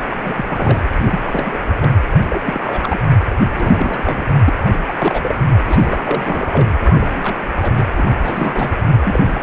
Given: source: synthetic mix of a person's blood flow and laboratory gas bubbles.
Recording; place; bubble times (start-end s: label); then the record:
Doppler ultrasound of blood flow; precordium
0.00-0.02 s: bubbles
0.10-0.81 s: bubbles
0.99-1.19 s: bubbles
1.25-1.59 s: bubbles
1.80-1.90 s: bubbles
2.29-2.41 s: bubbles
2.45-3.02 s: bubbles
3.38-4.27 s: bubbles
4.45-4.54 s: bubbles
4.66-4.78 s: bubbles
4.88-5.35 s: bubbles
5.49-5.54 s: bubbles
5.67-6.69 s: bubbles
6.83-7.36 s: bubbles
7.61-7.84 s: bubbles
7.96-8.12 s: bubbles
8.18-8.78 s: bubbles
9.05-9.43 s: bubbles
From the record:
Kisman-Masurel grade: 342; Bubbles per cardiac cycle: rolling drumbeat, 9 or more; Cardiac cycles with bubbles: 100%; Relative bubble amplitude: moderate (0.250 to 0.450); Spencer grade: 3 (all of the cardiac periods contain showers or single bubble signals, but not dominating or overriding the cardiac motion signals); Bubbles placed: anywhere in the cardiac cycle